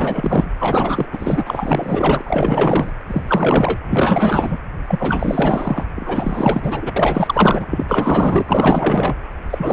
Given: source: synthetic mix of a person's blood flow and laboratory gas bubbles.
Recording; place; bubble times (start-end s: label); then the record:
Doppler ultrasound of blood flow; precordium
0.00-0.48 s: bubbles
0.58-1.06 s: bubbles
1.12-2.21 s: bubbles
2.24-2.92 s: bubbles
3.07-3.78 s: bubbles
3.90-4.57 s: bubbles
4.88-5.84 s: bubbles
5.96-6.92 s: bubbles
6.96-7.66 s: bubbles
7.70-7.85 s: bubbles
7.88-9.14 s: bubbles
9.49-9.73 s: bubbles
From the record:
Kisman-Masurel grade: 444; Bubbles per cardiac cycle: continuous sound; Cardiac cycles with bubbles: 100%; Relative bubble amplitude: maximal (0.775 to 0.999); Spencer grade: 4 (maximum detectable bubble signal sounding continuously throughout systole and diastole of every cardiac period, and overriding the amplitude of the normal cardiac signals); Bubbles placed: anywhere in the cardiac cycle